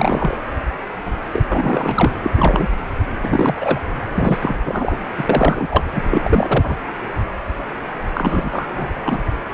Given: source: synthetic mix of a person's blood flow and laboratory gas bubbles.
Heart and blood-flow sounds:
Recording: Doppler ultrasound of blood flow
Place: precordium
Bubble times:
0.00-0.38 s: bubbles
1.33-1.45 s: bubbles
1.49-2.10 s: bubbles
2.23-2.30 s: bubbles
2.36-2.68 s: bubbles
3.22-3.79 s: bubbles
4.15-4.56 s: bubbles
4.65-5.00 s: bubbles
5.17-5.25 s: bubbles
5.29-5.83 s: bubbles
5.92-6.03 s: bubbles
6.11-6.75 s: bubbles
8.14-9.18 s: bubbles
From the record:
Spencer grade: 3 (all of the cardiac periods contain showers or single bubble signals, but not dominating or overriding the cardiac motion signals)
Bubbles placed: anywhere in the cardiac cycle

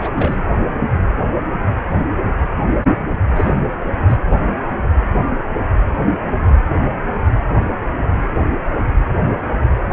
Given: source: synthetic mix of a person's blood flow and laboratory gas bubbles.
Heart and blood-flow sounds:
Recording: Doppler ultrasound of blood flow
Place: precordium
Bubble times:
0.00-0.12 s: bubbles
0.15-0.52 s: bubbles
3.35-3.59 s: bubbles
4.08-4.16 s: bubbles
From the record:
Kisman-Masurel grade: 222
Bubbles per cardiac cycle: several, 3 to 8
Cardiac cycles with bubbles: 10 to 50%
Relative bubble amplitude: moderate (0.250 to 0.450)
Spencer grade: 2 (many but less than half of the cardiac periods contain bubble signals, singularly or in groups)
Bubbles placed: anywhere in the cardiac cycle

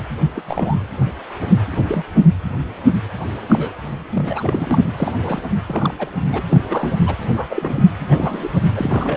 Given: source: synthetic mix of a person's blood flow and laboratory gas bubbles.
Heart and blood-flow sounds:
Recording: Doppler ultrasound of blood flow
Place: precordium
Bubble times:
0.35-0.42 s: bubbles
0.47-0.76 s: bubbles
1.71-2.04 s: bubbles
3.49-3.73 s: bubbles
4.15-4.83 s: bubbles
4.96-5.12 s: bubbles
5.22-5.41 s: bubbles
5.67-5.94 s: bubbles
5.99-6.11 s: bubbles
6.23-6.43 s: bubbles
6.52-6.61 s: bubbles
6.69-6.94 s: bubbles
7.06-7.15 s: bubbles
7.35-7.47 s: bubbles
7.50-7.82 s: bubbles
8.11-8.48 s: bubbles
8.76-9.17 s: bubbles
From the record:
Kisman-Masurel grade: 232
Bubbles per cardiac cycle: several, 3 to 8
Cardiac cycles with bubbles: 50 to 99%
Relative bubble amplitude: moderate (0.250 to 0.450)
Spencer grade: 3 (all of the cardiac periods contain showers or single bubble signals, but not dominating or overriding the cardiac motion signals)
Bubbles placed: anywhere in the cardiac cycle

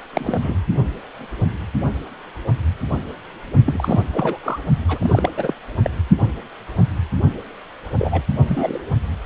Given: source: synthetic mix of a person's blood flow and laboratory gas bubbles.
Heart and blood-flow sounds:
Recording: Doppler ultrasound of blood flow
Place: precordium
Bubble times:
0.14-0.56 s: bubbles
3.66-4.02 s: bubbles
4.13-4.38 s: bubbles
4.43-4.59 s: bubbles
4.88-5.54 s: bubbles
5.82-5.90 s: bubbles
7.98-8.23 s: bubbles
8.47-8.79 s: bubbles
From the record:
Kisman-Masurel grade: 232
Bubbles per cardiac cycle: several, 3 to 8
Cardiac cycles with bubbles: 50 to 99%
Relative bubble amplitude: moderate (0.250 to 0.450)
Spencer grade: 3 (all of the cardiac periods contain showers or single bubble signals, but not dominating or overriding the cardiac motion signals)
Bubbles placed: only in the low amplitude regions of the cardiac cycle

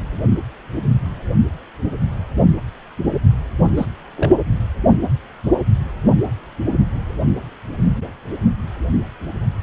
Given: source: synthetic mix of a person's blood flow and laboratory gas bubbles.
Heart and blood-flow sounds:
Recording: Doppler ultrasound of blood flow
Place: precordium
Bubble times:
3.77-3.85 s: bubbles
4.16-4.35 s: bubbles
From the record:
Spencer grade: 2 (many but less than half of the cardiac periods contain bubble signals, singularly or in groups)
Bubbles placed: only in the low amplitude regions of the cardiac cycle

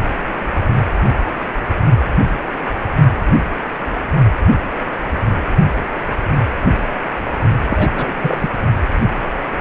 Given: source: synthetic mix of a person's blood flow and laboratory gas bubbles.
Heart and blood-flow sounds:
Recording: Doppler ultrasound of blood flow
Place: precordium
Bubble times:
7.69-7.91 s: bubbles
7.95-8.15 s: bubbles
8.22-8.49 s: bubbles
From the record:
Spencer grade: 1 (occasional bubble signal discernible with the cardiac motion signal, with majority of cardiac periods free of bubbles)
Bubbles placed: only in the low amplitude regions of the cardiac cycle

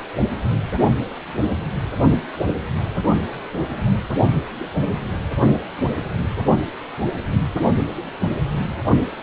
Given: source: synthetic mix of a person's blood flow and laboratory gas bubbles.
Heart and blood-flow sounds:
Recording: Doppler ultrasound of blood flow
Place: precordium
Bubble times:
no bubbles
From the record:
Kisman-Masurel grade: 000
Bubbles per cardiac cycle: 0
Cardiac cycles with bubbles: 0%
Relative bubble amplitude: no bubbles discernible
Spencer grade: 0 (complete lack of bubble signals)

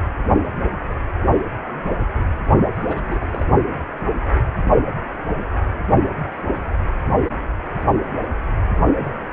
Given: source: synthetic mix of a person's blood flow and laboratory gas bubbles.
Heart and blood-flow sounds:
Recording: Doppler ultrasound of blood flow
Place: precordium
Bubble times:
2.75-3.44 s: bubbles
From the record:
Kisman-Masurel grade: 221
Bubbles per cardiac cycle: several, 3 to 8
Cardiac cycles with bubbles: 10 to 50%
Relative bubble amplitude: barely perceptible (0.100 to 0.250)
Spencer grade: 2 (many but less than half of the cardiac periods contain bubble signals, singularly or in groups)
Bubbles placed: only in the low amplitude regions of the cardiac cycle

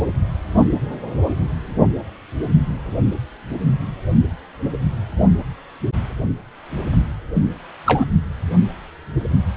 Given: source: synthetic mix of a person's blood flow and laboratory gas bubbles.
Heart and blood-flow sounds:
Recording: Doppler ultrasound of blood flow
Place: precordium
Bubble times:
7.34-7.44 s: bubbles
7.86-8.05 s: bubbles
From the record:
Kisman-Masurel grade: 123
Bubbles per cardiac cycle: 1 to 2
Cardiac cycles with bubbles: 10 to 50%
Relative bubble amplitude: loud (0.450 to 0.775)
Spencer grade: 2 (many but less than half of the cardiac periods contain bubble signals, singularly or in groups)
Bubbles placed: only in the low amplitude regions of the cardiac cycle

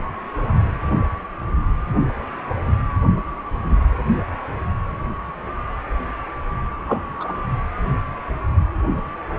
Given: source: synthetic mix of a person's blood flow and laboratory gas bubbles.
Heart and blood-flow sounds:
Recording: Doppler ultrasound of blood flow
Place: precordium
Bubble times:
6.87-7.02 s: bubbles
7.19-7.33 s: bubbles
From the record:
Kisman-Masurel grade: 112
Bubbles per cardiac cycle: 1 to 2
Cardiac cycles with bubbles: 1 to 10%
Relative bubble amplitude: moderate (0.250 to 0.450)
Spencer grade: 1 (occasional bubble signal discernible with the cardiac motion signal, with majority of cardiac periods free of bubbles)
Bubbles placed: anywhere in the cardiac cycle

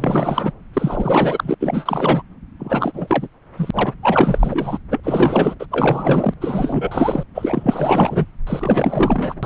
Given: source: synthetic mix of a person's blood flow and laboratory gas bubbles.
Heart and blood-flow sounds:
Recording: Doppler ultrasound of blood flow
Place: subclavian vein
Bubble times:
0.00-0.53 s: bubbles
0.73-1.54 s: bubbles
1.60-2.22 s: bubbles
2.59-3.28 s: bubbles
3.57-3.93 s: bubbles
4.03-4.78 s: bubbles
4.91-5.00 s: bubbles
5.04-5.55 s: bubbles
5.59-5.66 s: bubbles
5.71-6.34 s: bubbles
6.41-7.24 s: bubbles
7.34-8.26 s: bubbles
8.46-9.35 s: bubbles
9.43-9.46 s: bubbles
From the record:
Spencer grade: 4 (maximum detectable bubble signal sounding continuously throughout systole and diastole of every cardiac period, and overriding the amplitude of the normal cardiac signals)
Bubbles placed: anywhere in the cardiac cycle

